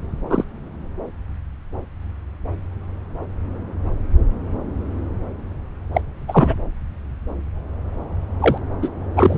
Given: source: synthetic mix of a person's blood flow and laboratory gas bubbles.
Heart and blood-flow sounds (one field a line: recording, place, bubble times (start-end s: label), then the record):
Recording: Doppler ultrasound of blood flow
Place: subclavian vein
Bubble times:
0.30-0.45 s: bubbles
5.94-6.01 s: bubbles
6.28-6.56 s: bubbles
8.40-8.58 s: bubbles
8.82-8.88 s: bubbles
9.16-9.38 s: bubbles
From the record:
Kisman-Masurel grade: 223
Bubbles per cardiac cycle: several, 3 to 8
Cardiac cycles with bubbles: 10 to 50%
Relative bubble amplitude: loud (0.450 to 0.775)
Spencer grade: 2 (many but less than half of the cardiac periods contain bubble signals, singularly or in groups)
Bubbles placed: anywhere in the cardiac cycle